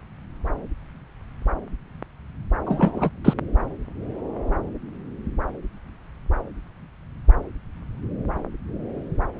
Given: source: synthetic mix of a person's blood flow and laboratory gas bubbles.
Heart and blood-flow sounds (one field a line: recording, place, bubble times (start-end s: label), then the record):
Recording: Doppler ultrasound of blood flow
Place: subclavian vein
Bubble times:
2.66-3.10 s: bubbles
3.25-3.33 s: bubbles
From the record:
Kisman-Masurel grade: 213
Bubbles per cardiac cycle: several, 3 to 8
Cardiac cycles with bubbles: 1 to 10%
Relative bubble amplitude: loud (0.450 to 0.775)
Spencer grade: 1 (occasional bubble signal discernible with the cardiac motion signal, with majority of cardiac periods free of bubbles)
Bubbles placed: anywhere in the cardiac cycle